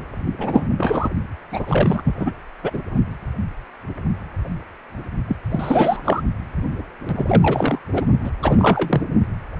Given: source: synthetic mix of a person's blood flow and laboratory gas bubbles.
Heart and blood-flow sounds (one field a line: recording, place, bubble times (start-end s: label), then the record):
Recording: Doppler ultrasound of blood flow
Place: precordium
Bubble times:
0.37-0.66 s: bubbles
0.78-1.10 s: bubbles
1.51-2.14 s: bubbles
2.19-2.33 s: bubbles
2.63-2.71 s: bubbles
2.73-2.81 s: bubbles
5.28-5.37 s: bubbles
5.50-6.22 s: bubbles
7.05-7.79 s: bubbles
7.94-8.05 s: bubbles
8.24-8.32 s: bubbles
8.42-9.02 s: bubbles
From the record:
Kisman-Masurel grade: 333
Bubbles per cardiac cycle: rolling drumbeat, 9 or more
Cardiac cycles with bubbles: 50 to 99%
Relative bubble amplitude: loud (0.450 to 0.775)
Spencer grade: 3 (all of the cardiac periods contain showers or single bubble signals, but not dominating or overriding the cardiac motion signals)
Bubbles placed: only in the low amplitude regions of the cardiac cycle